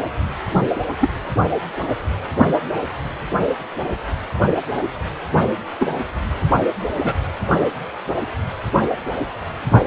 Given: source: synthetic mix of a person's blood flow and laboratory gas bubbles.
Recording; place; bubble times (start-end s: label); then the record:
Doppler ultrasound of blood flow; precordium
0.99-1.09 s: bubbles
5.79-5.90 s: bubbles
6.99-7.15 s: bubbles
From the record:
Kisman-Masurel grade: 122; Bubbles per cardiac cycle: 1 to 2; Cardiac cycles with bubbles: 10 to 50%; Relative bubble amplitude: moderate (0.250 to 0.450); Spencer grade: 2 (many but less than half of the cardiac periods contain bubble signals, singularly or in groups); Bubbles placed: only in the low amplitude regions of the cardiac cycle